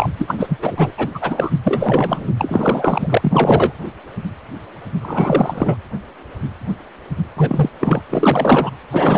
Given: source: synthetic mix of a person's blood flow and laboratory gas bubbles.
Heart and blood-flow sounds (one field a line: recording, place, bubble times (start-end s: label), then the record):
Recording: Doppler ultrasound of blood flow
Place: precordium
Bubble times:
0.00-0.09 s: bubbles
0.17-0.58 s: bubbles
0.61-0.92 s: bubbles
0.97-1.08 s: bubbles
1.14-1.51 s: bubbles
1.63-2.31 s: bubbles
2.37-3.72 s: bubbles
5.00-5.77 s: bubbles
7.36-7.70 s: bubbles
7.80-8.02 s: bubbles
8.09-8.71 s: bubbles
8.90-9.18 s: bubbles
From the record:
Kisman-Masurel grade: 333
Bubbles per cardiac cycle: rolling drumbeat, 9 or more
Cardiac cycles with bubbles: 50 to 99%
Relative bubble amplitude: loud (0.450 to 0.775)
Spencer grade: 3 (all of the cardiac periods contain showers or single bubble signals, but not dominating or overriding the cardiac motion signals)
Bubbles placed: anywhere in the cardiac cycle